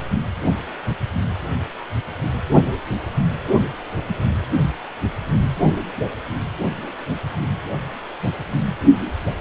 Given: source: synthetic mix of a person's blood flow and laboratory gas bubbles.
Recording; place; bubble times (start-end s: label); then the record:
Doppler ultrasound of blood flow; precordium
no bubbles
From the record:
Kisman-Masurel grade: 000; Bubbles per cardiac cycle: 0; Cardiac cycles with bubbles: 0%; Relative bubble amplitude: no bubbles discernible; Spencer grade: 0 (complete lack of bubble signals)